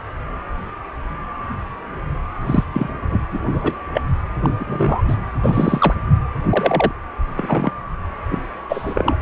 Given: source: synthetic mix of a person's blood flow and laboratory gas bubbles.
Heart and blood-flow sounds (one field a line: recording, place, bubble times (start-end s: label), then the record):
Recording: Doppler ultrasound of blood flow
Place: precordium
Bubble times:
2.46-2.64 s: bubbles
2.73-2.89 s: bubbles
3.01-3.19 s: bubbles
3.30-3.40 s: bubbles
3.52-3.83 s: bubbles
3.94-4.01 s: bubbles
4.43-4.50 s: bubbles
4.59-5.03 s: bubbles
5.08-5.17 s: bubbles
5.43-5.94 s: bubbles
6.50-6.92 s: bubbles
7.36-7.71 s: bubbles
8.30-8.42 s: bubbles
8.69-9.17 s: bubbles
From the record:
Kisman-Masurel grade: 233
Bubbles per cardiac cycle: several, 3 to 8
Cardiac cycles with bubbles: 50 to 99%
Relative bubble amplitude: loud (0.450 to 0.775)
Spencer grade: 3 (all of the cardiac periods contain showers or single bubble signals, but not dominating or overriding the cardiac motion signals)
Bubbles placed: anywhere in the cardiac cycle